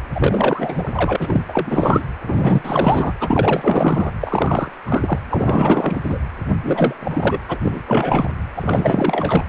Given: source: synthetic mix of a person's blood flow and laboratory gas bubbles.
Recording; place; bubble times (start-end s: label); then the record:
Doppler ultrasound of blood flow; precordium
0.14-1.17 s: bubbles
1.19-1.42 s: bubbles
1.48-2.07 s: bubbles
2.26-3.13 s: bubbles
3.20-4.11 s: bubbles
4.20-4.73 s: bubbles
4.86-5.19 s: bubbles
5.30-6.19 s: bubbles
6.48-6.94 s: bubbles
7.00-7.40 s: bubbles
7.48-7.58 s: bubbles
7.63-7.83 s: bubbles
7.87-8.29 s: bubbles
8.55-9.44 s: bubbles
From the record:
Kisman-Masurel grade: 444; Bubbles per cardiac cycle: continuous sound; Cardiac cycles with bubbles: 100%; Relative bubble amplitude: maximal (0.775 to 0.999); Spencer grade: 4 (maximum detectable bubble signal sounding continuously throughout systole and diastole of every cardiac period, and overriding the amplitude of the normal cardiac signals); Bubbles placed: anywhere in the cardiac cycle